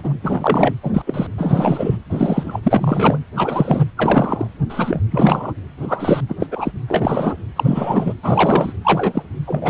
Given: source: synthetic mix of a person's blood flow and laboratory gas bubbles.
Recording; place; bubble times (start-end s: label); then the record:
Doppler ultrasound of blood flow; precordium
0.00-0.13 s: bubbles
0.23-0.73 s: bubbles
0.83-1.02 s: bubbles
1.06-1.27 s: bubbles
1.38-1.98 s: bubbles
2.09-2.60 s: bubbles
2.63-3.18 s: bubbles
3.35-3.85 s: bubbles
3.97-4.47 s: bubbles
4.69-5.01 s: bubbles
5.11-5.53 s: bubbles
5.80-6.21 s: bubbles
6.28-6.35 s: bubbles
6.39-6.47 s: bubbles
6.51-6.71 s: bubbles
6.88-7.36 s: bubbles
7.56-8.13 s: bubbles
8.23-8.73 s: bubbles
8.85-9.24 s: bubbles
9.47-9.70 s: bubbles
From the record:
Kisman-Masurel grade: 243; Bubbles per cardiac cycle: several, 3 to 8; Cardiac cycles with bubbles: 100%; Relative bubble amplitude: loud (0.450 to 0.775); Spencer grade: 3 (all of the cardiac periods contain showers or single bubble signals, but not dominating or overriding the cardiac motion signals); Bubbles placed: anywhere in the cardiac cycle